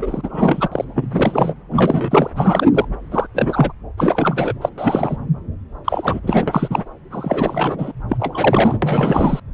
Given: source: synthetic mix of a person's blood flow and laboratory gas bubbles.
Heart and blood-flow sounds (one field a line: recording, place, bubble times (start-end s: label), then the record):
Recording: Doppler ultrasound of blood flow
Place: subclavian vein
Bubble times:
0.00-0.68 s: bubbles
0.71-0.84 s: bubbles
0.94-1.07 s: bubbles
1.10-1.53 s: bubbles
1.71-2.30 s: bubbles
2.36-2.71 s: bubbles
2.74-2.85 s: bubbles
3.12-3.26 s: bubbles
3.34-3.72 s: bubbles
3.97-4.53 s: bubbles
4.61-4.69 s: bubbles
4.78-5.17 s: bubbles
5.85-6.20 s: bubbles
6.23-6.83 s: bubbles
7.12-7.92 s: bubbles
8.09-8.78 s: bubbles
8.82-9.40 s: bubbles
From the record:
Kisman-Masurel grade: 343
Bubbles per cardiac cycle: rolling drumbeat, 9 or more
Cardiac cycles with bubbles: 100%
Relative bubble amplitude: loud (0.450 to 0.775)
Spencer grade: 3 (all of the cardiac periods contain showers or single bubble signals, but not dominating or overriding the cardiac motion signals)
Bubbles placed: anywhere in the cardiac cycle